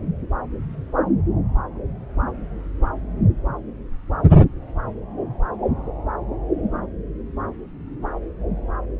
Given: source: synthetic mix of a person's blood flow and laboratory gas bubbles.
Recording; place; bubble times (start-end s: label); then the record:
Doppler ultrasound of blood flow; subclavian vein
no bubbles
From the record:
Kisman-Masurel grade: 000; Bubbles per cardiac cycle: 0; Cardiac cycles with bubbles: 0%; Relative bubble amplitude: no bubbles discernible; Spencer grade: 0 (complete lack of bubble signals)